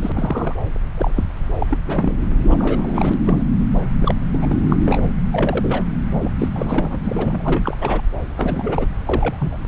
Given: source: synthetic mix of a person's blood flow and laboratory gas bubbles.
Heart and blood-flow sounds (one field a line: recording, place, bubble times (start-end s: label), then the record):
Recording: Doppler ultrasound of blood flow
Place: subclavian vein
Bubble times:
0.01-0.12 s: bubbles
0.15-0.55 s: bubbles
0.97-1.10 s: bubbles
1.16-1.24 s: bubbles
1.60-1.67 s: bubbles
1.70-1.78 s: bubbles
1.87-2.12 s: bubbles
2.47-3.14 s: bubbles
3.24-3.44 s: bubbles
4.00-4.15 s: bubbles
4.32-4.59 s: bubbles
4.70-4.76 s: bubbles
4.86-5.03 s: bubbles
5.31-5.83 s: bubbles
6.15-6.19 s: bubbles
6.21-6.32 s: bubbles
6.38-6.48 s: bubbles
6.56-6.97 s: bubbles
7.04-7.77 s: bubbles
7.81-8.01 s: bubbles
8.37-8.86 s: bubbles
9.06-9.56 s: bubbles
From the record:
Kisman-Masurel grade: 242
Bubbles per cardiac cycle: several, 3 to 8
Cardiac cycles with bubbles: 100%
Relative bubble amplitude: moderate (0.250 to 0.450)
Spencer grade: 3 (all of the cardiac periods contain showers or single bubble signals, but not dominating or overriding the cardiac motion signals)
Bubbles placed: anywhere in the cardiac cycle